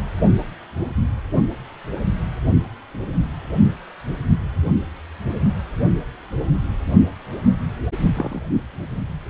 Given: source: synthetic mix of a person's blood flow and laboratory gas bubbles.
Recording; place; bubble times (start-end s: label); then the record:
Doppler ultrasound of blood flow; precordium
8.13-8.42 s: bubbles
From the record:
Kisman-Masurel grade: 112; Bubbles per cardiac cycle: 1 to 2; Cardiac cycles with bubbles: 1 to 10%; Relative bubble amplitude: moderate (0.250 to 0.450); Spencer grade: 1 (occasional bubble signal discernible with the cardiac motion signal, with majority of cardiac periods free of bubbles); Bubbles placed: only in the low amplitude regions of the cardiac cycle